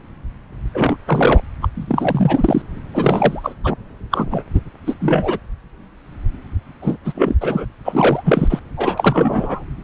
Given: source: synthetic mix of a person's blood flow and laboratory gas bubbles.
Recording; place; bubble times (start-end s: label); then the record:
Doppler ultrasound of blood flow; subclavian vein
0.74-0.96 s: bubbles
1.06-1.44 s: bubbles
1.62-1.68 s: bubbles
1.75-2.62 s: bubbles
2.94-3.55 s: bubbles
3.64-3.74 s: bubbles
4.11-4.44 s: bubbles
4.54-4.61 s: bubbles
4.86-4.95 s: bubbles
5.00-5.38 s: bubbles
6.82-6.96 s: bubbles
7.04-7.35 s: bubbles
7.41-7.65 s: bubbles
7.85-8.60 s: bubbles
8.77-9.64 s: bubbles
From the record:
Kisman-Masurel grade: 333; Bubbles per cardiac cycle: rolling drumbeat, 9 or more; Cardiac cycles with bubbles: 50 to 99%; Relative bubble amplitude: loud (0.450 to 0.775); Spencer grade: 3 (all of the cardiac periods contain showers or single bubble signals, but not dominating or overriding the cardiac motion signals); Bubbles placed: anywhere in the cardiac cycle